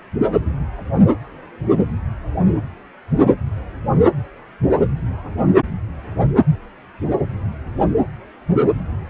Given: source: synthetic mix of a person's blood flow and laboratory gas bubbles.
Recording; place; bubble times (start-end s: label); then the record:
Doppler ultrasound of blood flow; precordium
0.32-0.40 s: bubbles
From the record:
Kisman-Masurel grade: 212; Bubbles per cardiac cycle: several, 3 to 8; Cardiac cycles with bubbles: 1 to 10%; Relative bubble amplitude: moderate (0.250 to 0.450); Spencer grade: 1 (occasional bubble signal discernible with the cardiac motion signal, with majority of cardiac periods free of bubbles); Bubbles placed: anywhere in the cardiac cycle